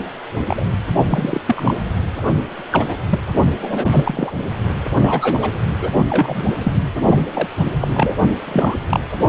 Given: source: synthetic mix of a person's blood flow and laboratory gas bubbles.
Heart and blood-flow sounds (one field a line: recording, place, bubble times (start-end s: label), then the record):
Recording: Doppler ultrasound of blood flow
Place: precordium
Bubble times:
0.47-0.67 s: bubbles
1.10-1.40 s: bubbles
1.46-1.74 s: bubbles
2.71-2.97 s: bubbles
3.09-3.19 s: bubbles
3.61-3.86 s: bubbles
3.91-4.32 s: bubbles
5.00-5.52 s: bubbles
5.80-5.91 s: bubbles
6.10-6.45 s: bubbles
6.64-6.73 s: bubbles
7.04-7.25 s: bubbles
7.33-7.48 s: bubbles
7.80-8.17 s: bubbles
8.46-8.75 s: bubbles
8.88-9.00 s: bubbles
From the record:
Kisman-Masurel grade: 243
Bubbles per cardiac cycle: several, 3 to 8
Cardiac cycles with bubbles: 100%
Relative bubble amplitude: loud (0.450 to 0.775)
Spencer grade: 3 (all of the cardiac periods contain showers or single bubble signals, but not dominating or overriding the cardiac motion signals)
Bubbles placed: only in the low amplitude regions of the cardiac cycle